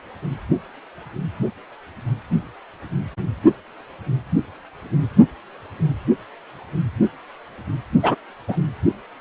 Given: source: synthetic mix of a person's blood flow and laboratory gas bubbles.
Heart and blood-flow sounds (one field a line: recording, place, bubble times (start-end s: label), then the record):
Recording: Doppler ultrasound of blood flow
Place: precordium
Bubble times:
8.03-8.16 s: bubbles
8.48-8.57 s: bubbles
From the record:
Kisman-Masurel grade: 113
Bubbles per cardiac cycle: 1 to 2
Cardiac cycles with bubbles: 1 to 10%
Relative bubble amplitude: loud (0.450 to 0.775)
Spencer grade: 1 (occasional bubble signal discernible with the cardiac motion signal, with majority of cardiac periods free of bubbles)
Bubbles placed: only in the low amplitude regions of the cardiac cycle